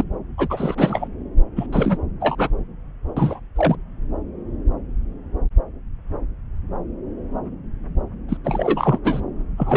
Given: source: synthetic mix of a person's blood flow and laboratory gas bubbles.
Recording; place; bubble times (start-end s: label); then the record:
Doppler ultrasound of blood flow; subclavian vein
0.00-0.04 s: bubbles
0.37-1.08 s: bubbles
1.56-1.66 s: bubbles
1.72-1.98 s: bubbles
2.20-2.50 s: bubbles
3.17-3.40 s: bubbles
3.56-3.77 s: bubbles
8.29-8.37 s: bubbles
8.44-8.98 s: bubbles
9.04-9.21 s: bubbles
9.57-9.77 s: bubbles
From the record:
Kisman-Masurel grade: 333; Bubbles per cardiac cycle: rolling drumbeat, 9 or more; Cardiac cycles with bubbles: 50 to 99%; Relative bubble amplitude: loud (0.450 to 0.775); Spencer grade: 3 (all of the cardiac periods contain showers or single bubble signals, but not dominating or overriding the cardiac motion signals); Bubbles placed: anywhere in the cardiac cycle